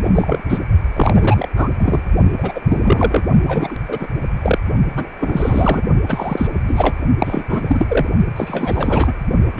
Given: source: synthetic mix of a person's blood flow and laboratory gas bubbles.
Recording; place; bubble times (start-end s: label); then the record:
Doppler ultrasound of blood flow; precordium
0.03-0.58 s: bubbles
0.96-1.48 s: bubbles
1.56-1.69 s: bubbles
1.78-2.01 s: bubbles
2.38-2.52 s: bubbles
2.55-2.60 s: bubbles
2.69-3.26 s: bubbles
3.46-3.78 s: bubbles
3.88-4.07 s: bubbles
4.42-4.58 s: bubbles
4.95-5.09 s: bubbles
5.20-5.82 s: bubbles
6.08-6.47 s: bubbles
6.68-6.98 s: bubbles
7.19-7.44 s: bubbles
7.49-8.07 s: bubbles
8.36-9.14 s: bubbles
9.54-9.59 s: bubbles
From the record:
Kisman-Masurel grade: 343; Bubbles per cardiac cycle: rolling drumbeat, 9 or more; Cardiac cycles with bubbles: 100%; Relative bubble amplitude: loud (0.450 to 0.775); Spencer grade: 3 (all of the cardiac periods contain showers or single bubble signals, but not dominating or overriding the cardiac motion signals); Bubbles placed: only in the low amplitude regions of the cardiac cycle